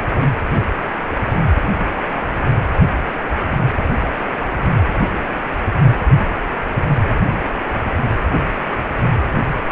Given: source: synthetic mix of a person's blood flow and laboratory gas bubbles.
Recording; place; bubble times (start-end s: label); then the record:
Doppler ultrasound of blood flow; precordium
no bubbles
From the record:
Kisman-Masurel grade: 000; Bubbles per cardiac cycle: 0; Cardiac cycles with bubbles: 0%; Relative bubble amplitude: no bubbles discernible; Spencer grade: 0 (complete lack of bubble signals)